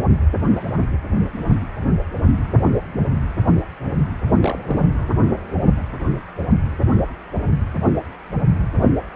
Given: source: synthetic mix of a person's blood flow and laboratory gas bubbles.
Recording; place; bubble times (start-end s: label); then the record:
Doppler ultrasound of blood flow; precordium
4.41-4.57 s: bubbles
4.67-4.81 s: bubbles
From the record:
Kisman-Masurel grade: 112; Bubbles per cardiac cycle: 1 to 2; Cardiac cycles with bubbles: 1 to 10%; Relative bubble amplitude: moderate (0.250 to 0.450); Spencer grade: 1 (occasional bubble signal discernible with the cardiac motion signal, with majority of cardiac periods free of bubbles); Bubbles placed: anywhere in the cardiac cycle